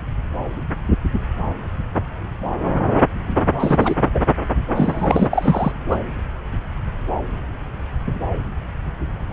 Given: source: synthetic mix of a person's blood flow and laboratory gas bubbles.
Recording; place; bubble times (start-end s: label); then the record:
Doppler ultrasound of blood flow; subclavian vein
3.59-3.94 s: bubbles
4.14-4.25 s: bubbles
4.75-5.72 s: bubbles
5.89-5.97 s: bubbles
From the record:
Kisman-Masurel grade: 223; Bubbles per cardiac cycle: several, 3 to 8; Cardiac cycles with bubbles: 10 to 50%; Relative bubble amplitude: loud (0.450 to 0.775); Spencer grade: 2 (many but less than half of the cardiac periods contain bubble signals, singularly or in groups); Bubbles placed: anywhere in the cardiac cycle